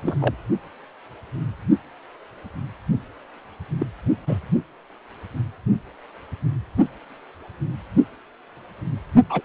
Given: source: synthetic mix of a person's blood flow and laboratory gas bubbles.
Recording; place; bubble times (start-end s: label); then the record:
Doppler ultrasound of blood flow; precordium
0.00-0.16 s: bubbles
0.20-0.34 s: bubbles
3.80-3.86 s: bubbles
4.26-4.39 s: bubbles
9.29-9.41 s: bubbles
From the record:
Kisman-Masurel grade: 122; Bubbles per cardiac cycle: 1 to 2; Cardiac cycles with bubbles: 10 to 50%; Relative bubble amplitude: moderate (0.250 to 0.450); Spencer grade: 2 (many but less than half of the cardiac periods contain bubble signals, singularly or in groups); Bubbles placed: only in the low amplitude regions of the cardiac cycle